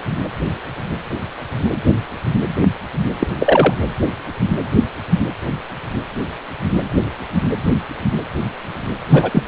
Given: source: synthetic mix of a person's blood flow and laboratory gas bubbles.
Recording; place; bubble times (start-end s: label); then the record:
Doppler ultrasound of blood flow; precordium
3.19-3.27 s: bubbles
3.40-3.74 s: bubbles
9.09-9.43 s: bubbles
From the record:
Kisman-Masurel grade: 223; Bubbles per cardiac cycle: several, 3 to 8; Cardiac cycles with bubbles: 10 to 50%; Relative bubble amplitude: loud (0.450 to 0.775); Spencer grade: 2 (many but less than half of the cardiac periods contain bubble signals, singularly or in groups); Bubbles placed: anywhere in the cardiac cycle